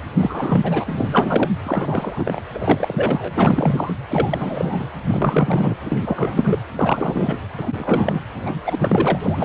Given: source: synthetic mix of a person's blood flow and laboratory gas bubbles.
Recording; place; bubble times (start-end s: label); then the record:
Doppler ultrasound of blood flow; precordium
0.19-1.50 s: bubbles
1.63-2.40 s: bubbles
2.54-3.31 s: bubbles
3.35-3.94 s: bubbles
4.08-4.85 s: bubbles
5.02-5.76 s: bubbles
5.85-6.58 s: bubbles
6.75-7.38 s: bubbles
7.57-8.20 s: bubbles
8.46-8.54 s: bubbles
8.66-9.45 s: bubbles
From the record:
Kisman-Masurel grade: 342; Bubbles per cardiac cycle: rolling drumbeat, 9 or more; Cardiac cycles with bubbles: 100%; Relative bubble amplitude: moderate (0.250 to 0.450); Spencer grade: 3 (all of the cardiac periods contain showers or single bubble signals, but not dominating or overriding the cardiac motion signals); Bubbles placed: anywhere in the cardiac cycle